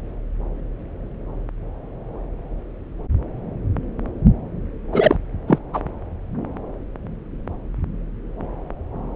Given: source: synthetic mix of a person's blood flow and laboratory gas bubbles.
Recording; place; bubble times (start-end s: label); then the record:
Doppler ultrasound of blood flow; subclavian vein
4.92-5.17 s: bubbles
5.48-5.58 s: bubbles
5.73-5.82 s: bubbles
From the record:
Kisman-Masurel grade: 123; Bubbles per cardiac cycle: 1 to 2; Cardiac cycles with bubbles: 10 to 50%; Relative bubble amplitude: loud (0.450 to 0.775); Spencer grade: 2 (many but less than half of the cardiac periods contain bubble signals, singularly or in groups); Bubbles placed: anywhere in the cardiac cycle